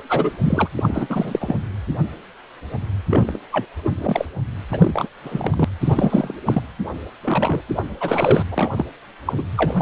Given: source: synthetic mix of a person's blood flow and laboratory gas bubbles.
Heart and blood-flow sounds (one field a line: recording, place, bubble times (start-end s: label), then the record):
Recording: Doppler ultrasound of blood flow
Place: precordium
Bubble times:
0.09-0.31 s: bubbles
0.43-0.69 s: bubbles
0.77-1.07 s: bubbles
1.09-1.56 s: bubbles
3.09-3.38 s: bubbles
3.51-3.65 s: bubbles
3.84-3.92 s: bubbles
3.98-4.25 s: bubbles
4.70-5.08 s: bubbles
5.22-5.64 s: bubbles
5.81-6.35 s: bubbles
6.46-6.62 s: bubbles
7.24-7.62 s: bubbles
7.76-7.83 s: bubbles
8.00-8.45 s: bubbles
8.51-8.71 s: bubbles
8.76-8.85 s: bubbles
9.26-9.44 s: bubbles
9.56-9.82 s: bubbles
From the record:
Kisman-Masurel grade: 332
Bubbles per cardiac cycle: rolling drumbeat, 9 or more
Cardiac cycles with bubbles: 50 to 99%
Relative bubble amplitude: moderate (0.250 to 0.450)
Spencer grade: 3 (all of the cardiac periods contain showers or single bubble signals, but not dominating or overriding the cardiac motion signals)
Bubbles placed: anywhere in the cardiac cycle